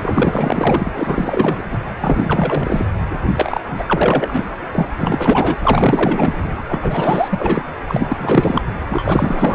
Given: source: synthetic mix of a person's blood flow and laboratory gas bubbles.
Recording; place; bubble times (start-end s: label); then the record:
Doppler ultrasound of blood flow; precordium
0.00-0.90 s: bubbles
0.96-1.64 s: bubbles
1.71-1.79 s: bubbles
2.00-2.85 s: bubbles
3.34-3.61 s: bubbles
3.78-4.49 s: bubbles
4.72-4.88 s: bubbles
4.99-5.57 s: bubbles
5.62-6.56 s: bubbles
6.69-7.28 s: bubbles
7.30-7.62 s: bubbles
7.88-8.62 s: bubbles
8.89-9.55 s: bubbles
From the record:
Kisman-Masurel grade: 444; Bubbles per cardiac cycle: continuous sound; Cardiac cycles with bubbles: 100%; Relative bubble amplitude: maximal (0.775 to 0.999); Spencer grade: 4 (maximum detectable bubble signal sounding continuously throughout systole and diastole of every cardiac period, and overriding the amplitude of the normal cardiac signals); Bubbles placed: anywhere in the cardiac cycle